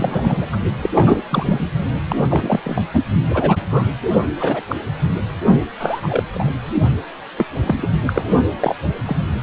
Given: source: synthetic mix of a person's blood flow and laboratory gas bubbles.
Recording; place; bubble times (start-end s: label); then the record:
Doppler ultrasound of blood flow; precordium
0.00-0.46 s: bubbles
0.52-0.56 s: bubbles
0.78-0.90 s: bubbles
0.94-1.22 s: bubbles
1.29-1.60 s: bubbles
2.08-2.25 s: bubbles
2.29-2.60 s: bubbles
2.64-2.81 s: bubbles
2.94-3.00 s: bubbles
3.27-3.87 s: bubbles
4.40-4.62 s: bubbles
4.68-4.76 s: bubbles
5.80-6.23 s: bubbles
6.35-6.52 s: bubbles
7.38-7.46 s: bubbles
7.56-7.90 s: bubbles
8.06-8.23 s: bubbles
8.60-8.75 s: bubbles
9.05-9.17 s: bubbles
From the record:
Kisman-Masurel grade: 233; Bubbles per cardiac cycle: several, 3 to 8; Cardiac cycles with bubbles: 50 to 99%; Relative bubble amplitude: loud (0.450 to 0.775); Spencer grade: 3 (all of the cardiac periods contain showers or single bubble signals, but not dominating or overriding the cardiac motion signals); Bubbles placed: anywhere in the cardiac cycle